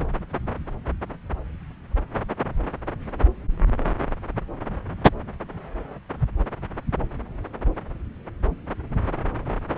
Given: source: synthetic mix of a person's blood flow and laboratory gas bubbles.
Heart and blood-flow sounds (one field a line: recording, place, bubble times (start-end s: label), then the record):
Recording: Doppler ultrasound of blood flow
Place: subclavian vein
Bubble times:
no bubbles
From the record:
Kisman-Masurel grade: 000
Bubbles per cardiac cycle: 0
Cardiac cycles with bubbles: 0%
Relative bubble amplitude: no bubbles discernible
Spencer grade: 0 (complete lack of bubble signals)